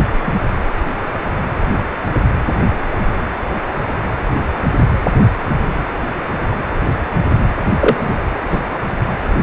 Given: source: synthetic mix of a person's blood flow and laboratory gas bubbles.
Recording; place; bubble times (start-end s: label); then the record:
Doppler ultrasound of blood flow; precordium
0.26-0.32 s: bubbles
7.77-8.16 s: bubbles
8.50-8.60 s: bubbles
From the record:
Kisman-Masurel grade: 123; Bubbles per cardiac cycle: 1 to 2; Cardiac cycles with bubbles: 10 to 50%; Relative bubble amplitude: loud (0.450 to 0.775); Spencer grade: 2 (many but less than half of the cardiac periods contain bubble signals, singularly or in groups); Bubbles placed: anywhere in the cardiac cycle